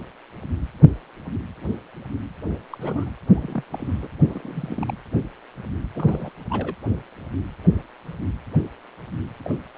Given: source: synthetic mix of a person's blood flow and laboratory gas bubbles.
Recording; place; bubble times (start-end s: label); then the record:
Doppler ultrasound of blood flow; precordium
2.70-2.77 s: bubbles
2.81-3.11 s: bubbles
3.35-3.63 s: bubbles
3.73-4.08 s: bubbles
4.29-4.91 s: bubbles
5.94-6.32 s: bubbles
6.50-6.75 s: bubbles
9.45-9.54 s: bubbles
9.76-9.78 s: bubbles
From the record:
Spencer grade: 2 (many but less than half of the cardiac periods contain bubble signals, singularly or in groups); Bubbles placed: anywhere in the cardiac cycle